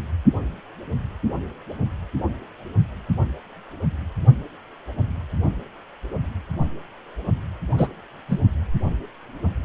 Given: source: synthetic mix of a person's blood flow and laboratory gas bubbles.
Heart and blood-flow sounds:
Doppler ultrasound of blood flow; precordium
7.77-7.88 s: bubbles
8.29-8.39 s: bubbles
From the record:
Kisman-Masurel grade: 113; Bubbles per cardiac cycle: 1 to 2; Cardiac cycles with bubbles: 1 to 10%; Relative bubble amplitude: loud (0.450 to 0.775); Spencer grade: 1 (occasional bubble signal discernible with the cardiac motion signal, with majority of cardiac periods free of bubbles); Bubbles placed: only in the low amplitude regions of the cardiac cycle

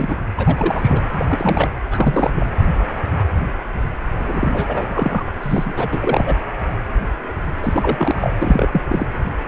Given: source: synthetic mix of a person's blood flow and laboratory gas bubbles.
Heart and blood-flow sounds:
Doppler ultrasound of blood flow; precordium
0.00-0.22 s: bubbles
0.36-1.02 s: bubbles
1.15-1.26 s: bubbles
1.29-1.74 s: bubbles
1.91-2.31 s: bubbles
2.35-2.47 s: bubbles
4.18-5.24 s: bubbles
5.27-5.31 s: bubbles
5.42-5.73 s: bubbles
5.76-6.34 s: bubbles
7.62-8.14 s: bubbles
8.21-8.33 s: bubbles
8.41-8.83 s: bubbles
8.88-9.07 s: bubbles
From the record:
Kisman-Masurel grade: 332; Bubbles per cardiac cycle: rolling drumbeat, 9 or more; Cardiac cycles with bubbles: 50 to 99%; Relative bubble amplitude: moderate (0.250 to 0.450); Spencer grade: 3 (all of the cardiac periods contain showers or single bubble signals, but not dominating or overriding the cardiac motion signals); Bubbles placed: anywhere in the cardiac cycle

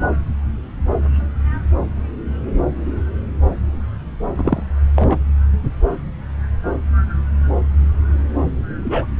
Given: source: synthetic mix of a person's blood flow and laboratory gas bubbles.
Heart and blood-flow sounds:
Doppler ultrasound of blood flow; subclavian vein
4.35-4.62 s: bubbles
4.96-5.18 s: bubbles
8.84-9.06 s: bubbles
From the record:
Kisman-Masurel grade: 123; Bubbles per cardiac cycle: 1 to 2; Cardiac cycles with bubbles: 10 to 50%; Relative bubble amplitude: loud (0.450 to 0.775); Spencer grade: 2 (many but less than half of the cardiac periods contain bubble signals, singularly or in groups); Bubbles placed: anywhere in the cardiac cycle

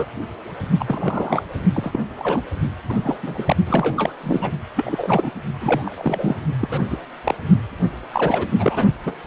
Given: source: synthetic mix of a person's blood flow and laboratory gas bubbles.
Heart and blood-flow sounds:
Doppler ultrasound of blood flow; precordium
0.00-0.05 s: bubbles
0.80-1.44 s: bubbles
1.74-2.00 s: bubbles
2.19-2.42 s: bubbles
2.89-2.97 s: bubbles
3.02-3.16 s: bubbles
3.23-3.56 s: bubbles
3.67-4.13 s: bubbles
4.23-4.51 s: bubbles
4.76-5.31 s: bubbles
5.60-6.36 s: bubbles
6.60-6.68 s: bubbles
6.71-6.87 s: bubbles
6.89-6.97 s: bubbles
7.24-7.34 s: bubbles
8.13-8.48 s: bubbles
8.58-8.86 s: bubbles
9.05-9.15 s: bubbles
From the record:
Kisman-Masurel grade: 242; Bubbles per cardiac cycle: several, 3 to 8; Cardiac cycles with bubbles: 100%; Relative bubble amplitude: moderate (0.250 to 0.450); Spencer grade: 3 (all of the cardiac periods contain showers or single bubble signals, but not dominating or overriding the cardiac motion signals); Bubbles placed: only in the low amplitude regions of the cardiac cycle

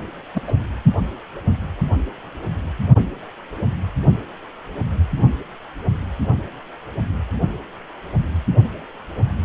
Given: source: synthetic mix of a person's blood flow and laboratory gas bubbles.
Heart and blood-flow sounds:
Doppler ultrasound of blood flow; precordium
0.34-0.42 s: bubbles
0.47-0.53 s: bubbles
From the record:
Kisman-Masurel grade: 112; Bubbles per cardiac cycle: 1 to 2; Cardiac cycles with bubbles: 1 to 10%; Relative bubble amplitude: moderate (0.250 to 0.450); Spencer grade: 1 (occasional bubble signal discernible with the cardiac motion signal, with majority of cardiac periods free of bubbles); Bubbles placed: only in the low amplitude regions of the cardiac cycle

